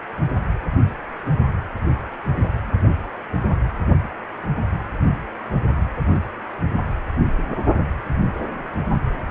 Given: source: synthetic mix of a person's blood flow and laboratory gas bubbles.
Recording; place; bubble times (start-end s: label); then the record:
Doppler ultrasound of blood flow; precordium
0.29-0.33 s: bubbles
From the record:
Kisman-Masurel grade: 111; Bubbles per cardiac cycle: 1 to 2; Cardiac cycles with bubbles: 1 to 10%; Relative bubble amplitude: barely perceptible (0.100 to 0.250); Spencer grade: 1 (occasional bubble signal discernible with the cardiac motion signal, with majority of cardiac periods free of bubbles); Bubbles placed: anywhere in the cardiac cycle